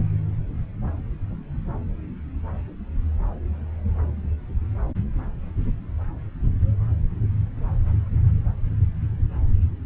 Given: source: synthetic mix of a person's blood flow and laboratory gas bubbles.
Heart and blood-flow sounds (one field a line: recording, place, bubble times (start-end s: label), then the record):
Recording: Doppler ultrasound of blood flow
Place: subclavian vein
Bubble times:
no bubbles
From the record:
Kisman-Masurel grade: 000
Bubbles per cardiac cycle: 0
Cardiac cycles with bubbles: 0%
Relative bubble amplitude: no bubbles discernible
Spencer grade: 0 (complete lack of bubble signals)